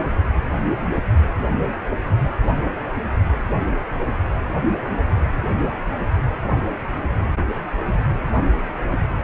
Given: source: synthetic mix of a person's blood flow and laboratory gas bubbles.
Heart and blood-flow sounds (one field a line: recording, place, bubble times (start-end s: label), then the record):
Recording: Doppler ultrasound of blood flow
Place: precordium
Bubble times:
no bubbles
From the record:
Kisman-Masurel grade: 000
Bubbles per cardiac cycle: 0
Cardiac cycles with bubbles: 0%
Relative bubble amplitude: no bubbles discernible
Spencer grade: 0 (complete lack of bubble signals)